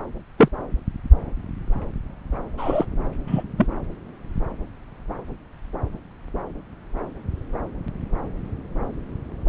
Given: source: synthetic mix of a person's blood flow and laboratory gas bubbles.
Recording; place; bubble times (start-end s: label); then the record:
Doppler ultrasound of blood flow; subclavian vein
0.38-0.48 s: bubbles
2.58-2.85 s: bubbles
3.27-3.42 s: bubbles
3.58-3.67 s: bubbles
From the record:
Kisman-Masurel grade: 123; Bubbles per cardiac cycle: 1 to 2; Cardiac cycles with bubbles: 10 to 50%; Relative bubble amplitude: loud (0.450 to 0.775); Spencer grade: 2 (many but less than half of the cardiac periods contain bubble signals, singularly or in groups); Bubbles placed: anywhere in the cardiac cycle